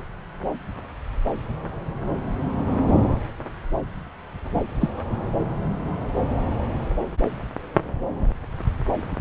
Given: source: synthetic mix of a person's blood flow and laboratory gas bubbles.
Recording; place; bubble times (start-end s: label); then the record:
Doppler ultrasound of blood flow; subclavian vein
4.54-4.61 s: bubbles
4.81-4.90 s: bubbles
From the record:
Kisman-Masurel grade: 112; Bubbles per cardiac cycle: 1 to 2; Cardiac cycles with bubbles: 1 to 10%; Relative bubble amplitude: moderate (0.250 to 0.450); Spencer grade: 1 (occasional bubble signal discernible with the cardiac motion signal, with majority of cardiac periods free of bubbles); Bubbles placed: anywhere in the cardiac cycle